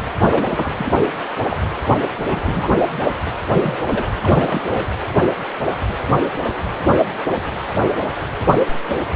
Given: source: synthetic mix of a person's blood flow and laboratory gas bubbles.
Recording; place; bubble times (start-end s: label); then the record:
Doppler ultrasound of blood flow; precordium
0.27-0.72 s: bubbles
0.76-0.92 s: bubbles
1.50-1.57 s: bubbles
2.29-2.69 s: bubbles
3.51-3.76 s: bubbles
3.84-4.05 s: bubbles
4.24-4.61 s: bubbles
4.74-4.88 s: bubbles
From the record:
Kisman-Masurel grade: 222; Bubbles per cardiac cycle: several, 3 to 8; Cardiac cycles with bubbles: 10 to 50%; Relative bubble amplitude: moderate (0.250 to 0.450); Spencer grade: 2 (many but less than half of the cardiac periods contain bubble signals, singularly or in groups); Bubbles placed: anywhere in the cardiac cycle